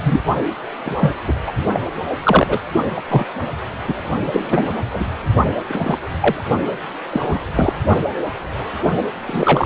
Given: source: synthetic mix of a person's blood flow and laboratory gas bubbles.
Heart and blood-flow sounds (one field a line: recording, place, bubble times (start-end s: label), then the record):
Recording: Doppler ultrasound of blood flow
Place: precordium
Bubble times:
0.03-0.20 s: bubbles
0.85-1.15 s: bubbles
1.27-1.33 s: bubbles
1.47-1.52 s: bubbles
1.72-1.79 s: bubbles
2.23-2.58 s: bubbles
2.96-3.02 s: bubbles
3.08-3.25 s: bubbles
3.88-3.94 s: bubbles
4.32-4.73 s: bubbles
4.94-5.04 s: bubbles
5.68-5.98 s: bubbles
6.18-6.46 s: bubbles
7.11-7.40 s: bubbles
7.55-7.74 s: bubbles
9.29-9.66 s: bubbles
From the record:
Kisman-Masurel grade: 233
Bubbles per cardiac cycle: several, 3 to 8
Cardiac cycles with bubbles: 50 to 99%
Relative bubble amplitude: loud (0.450 to 0.775)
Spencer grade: 3 (all of the cardiac periods contain showers or single bubble signals, but not dominating or overriding the cardiac motion signals)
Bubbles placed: only in the low amplitude regions of the cardiac cycle